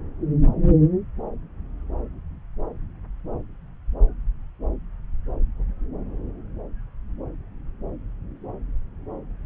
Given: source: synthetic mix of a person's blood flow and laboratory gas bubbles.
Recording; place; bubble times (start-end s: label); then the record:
Doppler ultrasound of blood flow; subclavian vein
no bubbles
From the record:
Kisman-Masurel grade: 000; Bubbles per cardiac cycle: 0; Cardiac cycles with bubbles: 0%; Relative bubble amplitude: no bubbles discernible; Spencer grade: 0 (complete lack of bubble signals)